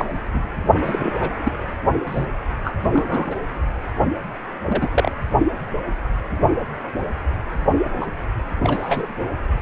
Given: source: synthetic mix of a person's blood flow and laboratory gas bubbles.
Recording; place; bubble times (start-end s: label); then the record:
Doppler ultrasound of blood flow; precordium
0.00-0.05 s: bubbles
0.33-0.48 s: bubbles
0.83-1.14 s: bubbles
1.20-1.31 s: bubbles
1.44-1.51 s: bubbles
2.06-2.26 s: bubbles
2.64-2.75 s: bubbles
2.92-3.39 s: bubbles
4.62-4.88 s: bubbles
4.92-5.12 s: bubbles
8.00-8.06 s: bubbles
8.63-9.12 s: bubbles
From the record:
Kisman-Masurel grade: 232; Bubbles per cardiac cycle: several, 3 to 8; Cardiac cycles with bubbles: 50 to 99%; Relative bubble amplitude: moderate (0.250 to 0.450); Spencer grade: 3 (all of the cardiac periods contain showers or single bubble signals, but not dominating or overriding the cardiac motion signals); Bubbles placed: only in the low amplitude regions of the cardiac cycle